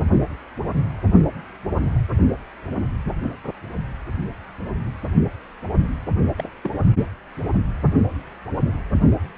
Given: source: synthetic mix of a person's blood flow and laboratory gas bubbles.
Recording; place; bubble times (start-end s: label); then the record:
Doppler ultrasound of blood flow; precordium
6.38-6.50 s: bubbles
6.63-6.75 s: bubbles
From the record:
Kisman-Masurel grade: 122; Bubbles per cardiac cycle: 1 to 2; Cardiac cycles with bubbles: 10 to 50%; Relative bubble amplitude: moderate (0.250 to 0.450); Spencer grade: 2 (many but less than half of the cardiac periods contain bubble signals, singularly or in groups); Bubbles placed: only in the low amplitude regions of the cardiac cycle